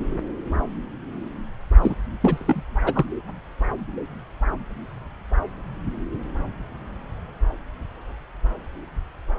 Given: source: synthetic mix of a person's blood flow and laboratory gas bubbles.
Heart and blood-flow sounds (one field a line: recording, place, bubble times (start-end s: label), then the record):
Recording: Doppler ultrasound of blood flow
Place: subclavian vein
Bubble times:
1.82-1.95 s: bubbles
2.22-2.63 s: bubbles
2.83-3.05 s: bubbles
From the record:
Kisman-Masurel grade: 222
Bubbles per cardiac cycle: several, 3 to 8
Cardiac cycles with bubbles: 10 to 50%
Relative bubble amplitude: moderate (0.250 to 0.450)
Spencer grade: 2 (many but less than half of the cardiac periods contain bubble signals, singularly or in groups)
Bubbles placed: anywhere in the cardiac cycle